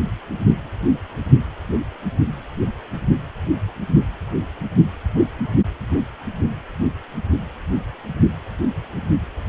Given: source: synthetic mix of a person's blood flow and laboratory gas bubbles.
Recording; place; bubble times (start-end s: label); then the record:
Doppler ultrasound of blood flow; precordium
no bubbles
From the record:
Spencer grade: 0 (complete lack of bubble signals)